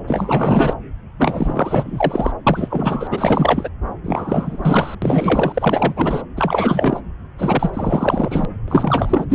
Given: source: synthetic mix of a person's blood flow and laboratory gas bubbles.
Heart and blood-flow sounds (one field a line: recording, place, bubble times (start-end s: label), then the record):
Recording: Doppler ultrasound of blood flow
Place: subclavian vein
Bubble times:
0.07-0.74 s: bubbles
1.17-2.31 s: bubbles
2.46-3.08 s: bubbles
3.10-3.69 s: bubbles
4.04-4.95 s: bubbles
5.02-6.22 s: bubbles
6.36-7.00 s: bubbles
7.38-7.71 s: bubbles
7.73-8.45 s: bubbles
8.68-9.26 s: bubbles
9.29-9.35 s: bubbles
From the record:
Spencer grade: 4 (maximum detectable bubble signal sounding continuously throughout systole and diastole of every cardiac period, and overriding the amplitude of the normal cardiac signals)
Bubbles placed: anywhere in the cardiac cycle